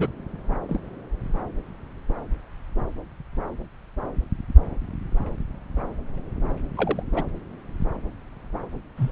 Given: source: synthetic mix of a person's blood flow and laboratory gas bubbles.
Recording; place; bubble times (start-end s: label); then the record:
Doppler ultrasound of blood flow; subclavian vein
0.00-0.10 s: bubbles
0.69-0.80 s: bubbles
6.76-7.03 s: bubbles
7.12-7.23 s: bubbles
8.96-9.11 s: bubbles
From the record:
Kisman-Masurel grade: 121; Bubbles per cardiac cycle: 1 to 2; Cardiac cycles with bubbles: 10 to 50%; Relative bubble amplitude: barely perceptible (0.100 to 0.250); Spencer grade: 2 (many but less than half of the cardiac periods contain bubble signals, singularly or in groups); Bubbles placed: anywhere in the cardiac cycle